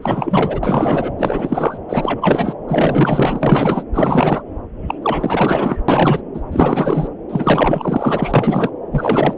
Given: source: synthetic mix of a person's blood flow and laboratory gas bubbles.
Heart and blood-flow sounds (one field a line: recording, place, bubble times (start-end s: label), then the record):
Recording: Doppler ultrasound of blood flow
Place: subclavian vein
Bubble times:
0.01-0.60 s: bubbles
0.63-1.11 s: bubbles
1.18-1.77 s: bubbles
1.89-2.54 s: bubbles
2.68-3.83 s: bubbles
3.94-4.43 s: bubbles
4.88-4.95 s: bubbles
5.02-5.76 s: bubbles
5.88-6.21 s: bubbles
6.34-6.41 s: bubbles
6.52-7.08 s: bubbles
7.29-8.70 s: bubbles
8.91-9.34 s: bubbles
From the record:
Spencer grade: 4 (maximum detectable bubble signal sounding continuously throughout systole and diastole of every cardiac period, and overriding the amplitude of the normal cardiac signals)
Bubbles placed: anywhere in the cardiac cycle